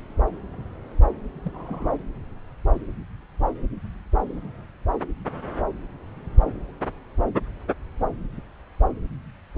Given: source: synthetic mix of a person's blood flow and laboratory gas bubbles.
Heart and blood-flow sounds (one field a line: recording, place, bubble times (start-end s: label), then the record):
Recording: Doppler ultrasound of blood flow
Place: subclavian vein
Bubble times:
1.43-1.95 s: bubbles
From the record:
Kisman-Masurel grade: 111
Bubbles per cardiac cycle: 1 to 2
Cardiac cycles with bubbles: 1 to 10%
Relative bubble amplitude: barely perceptible (0.100 to 0.250)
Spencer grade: 1 (occasional bubble signal discernible with the cardiac motion signal, with majority of cardiac periods free of bubbles)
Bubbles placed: anywhere in the cardiac cycle